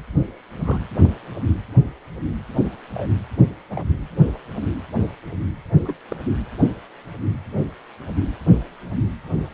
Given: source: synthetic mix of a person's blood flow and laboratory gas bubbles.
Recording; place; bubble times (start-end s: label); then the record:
Doppler ultrasound of blood flow; precordium
0.54-0.81 s: bubbles
2.95-3.08 s: bubbles
3.70-3.84 s: bubbles
5.83-5.96 s: bubbles
6.08-6.16 s: bubbles
From the record:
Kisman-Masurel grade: 121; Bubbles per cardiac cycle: 1 to 2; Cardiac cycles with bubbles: 10 to 50%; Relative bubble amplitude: barely perceptible (0.100 to 0.250); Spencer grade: 2 (many but less than half of the cardiac periods contain bubble signals, singularly or in groups); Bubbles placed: only in the low amplitude regions of the cardiac cycle